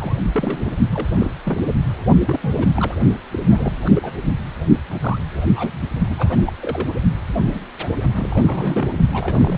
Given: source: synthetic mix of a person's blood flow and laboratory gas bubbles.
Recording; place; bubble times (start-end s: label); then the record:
Doppler ultrasound of blood flow; precordium
0.00-0.23 s: bubbles
0.32-0.74 s: bubbles
0.90-1.08 s: bubbles
1.13-1.35 s: bubbles
1.44-1.62 s: bubbles
2.27-2.67 s: bubbles
2.73-2.95 s: bubbles
3.32-3.40 s: bubbles
3.50-3.77 s: bubbles
3.85-3.90 s: bubbles
3.94-4.11 s: bubbles
4.89-4.96 s: bubbles
5.00-5.19 s: bubbles
5.55-5.92 s: bubbles
6.09-6.53 s: bubbles
6.60-6.89 s: bubbles
7.42-7.61 s: bubbles
7.82-7.97 s: bubbles
8.15-8.88 s: bubbles
9.12-9.58 s: bubbles
From the record:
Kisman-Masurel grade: 242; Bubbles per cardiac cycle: several, 3 to 8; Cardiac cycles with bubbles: 100%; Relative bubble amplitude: moderate (0.250 to 0.450); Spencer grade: 3 (all of the cardiac periods contain showers or single bubble signals, but not dominating or overriding the cardiac motion signals); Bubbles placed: only in the low amplitude regions of the cardiac cycle